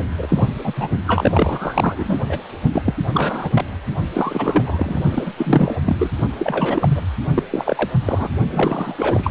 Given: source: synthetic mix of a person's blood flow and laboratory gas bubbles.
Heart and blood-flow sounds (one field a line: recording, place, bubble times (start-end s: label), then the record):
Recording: Doppler ultrasound of blood flow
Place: precordium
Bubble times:
0.18-0.47 s: bubbles
0.64-0.74 s: bubbles
0.76-0.89 s: bubbles
1.07-2.19 s: bubbles
2.29-2.39 s: bubbles
2.72-2.82 s: bubbles
2.85-2.95 s: bubbles
3.14-3.50 s: bubbles
3.54-3.64 s: bubbles
4.14-5.01 s: bubbles
5.12-5.32 s: bubbles
5.36-5.81 s: bubbles
5.86-5.96 s: bubbles
6.00-6.11 s: bubbles
6.38-7.01 s: bubbles
7.35-7.43 s: bubbles
7.50-7.89 s: bubbles
8.05-8.29 s: bubbles
8.51-9.31 s: bubbles
From the record:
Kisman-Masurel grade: 342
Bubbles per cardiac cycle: rolling drumbeat, 9 or more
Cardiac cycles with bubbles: 100%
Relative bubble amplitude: moderate (0.250 to 0.450)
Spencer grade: 3 (all of the cardiac periods contain showers or single bubble signals, but not dominating or overriding the cardiac motion signals)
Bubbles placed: only in the low amplitude regions of the cardiac cycle